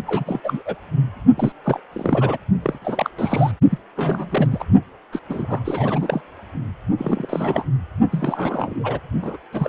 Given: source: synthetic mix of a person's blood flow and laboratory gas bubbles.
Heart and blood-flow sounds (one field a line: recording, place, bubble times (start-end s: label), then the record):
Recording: Doppler ultrasound of blood flow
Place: precordium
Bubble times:
0.07-0.40 s: bubbles
0.43-0.62 s: bubbles
0.65-0.75 s: bubbles
1.37-1.52 s: bubbles
1.64-1.80 s: bubbles
1.93-2.38 s: bubbles
2.62-2.78 s: bubbles
2.81-3.10 s: bubbles
3.17-3.51 s: bubbles
3.71-3.78 s: bubbles
3.96-4.47 s: bubbles
4.51-4.64 s: bubbles
5.12-5.21 s: bubbles
5.29-6.21 s: bubbles
6.97-7.64 s: bubbles
8.12-8.99 s: bubbles
9.22-9.37 s: bubbles
9.53-9.69 s: bubbles
From the record:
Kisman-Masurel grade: 332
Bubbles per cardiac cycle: rolling drumbeat, 9 or more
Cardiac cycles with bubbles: 50 to 99%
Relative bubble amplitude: moderate (0.250 to 0.450)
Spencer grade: 3 (all of the cardiac periods contain showers or single bubble signals, but not dominating or overriding the cardiac motion signals)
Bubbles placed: only in the low amplitude regions of the cardiac cycle